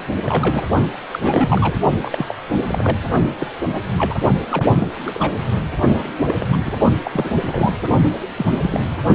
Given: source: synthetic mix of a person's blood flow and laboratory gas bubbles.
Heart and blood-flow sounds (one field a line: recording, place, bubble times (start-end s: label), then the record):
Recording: Doppler ultrasound of blood flow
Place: precordium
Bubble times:
0.23-0.69 s: bubbles
1.11-1.19 s: bubbles
1.22-1.75 s: bubbles
2.02-2.34 s: bubbles
2.67-2.97 s: bubbles
3.40-3.47 s: bubbles
3.73-3.80 s: bubbles
3.98-4.14 s: bubbles
4.51-4.88 s: bubbles
5.07-5.42 s: bubbles
5.94-6.22 s: bubbles
6.28-6.45 s: bubbles
6.49-6.62 s: bubbles
6.65-6.76 s: bubbles
7.04-7.34 s: bubbles
7.39-7.73 s: bubbles
8.38-8.46 s: bubbles
8.49-8.84 s: bubbles
From the record:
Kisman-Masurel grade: 242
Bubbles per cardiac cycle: several, 3 to 8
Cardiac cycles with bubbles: 100%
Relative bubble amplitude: moderate (0.250 to 0.450)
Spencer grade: 3 (all of the cardiac periods contain showers or single bubble signals, but not dominating or overriding the cardiac motion signals)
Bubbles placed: only in the low amplitude regions of the cardiac cycle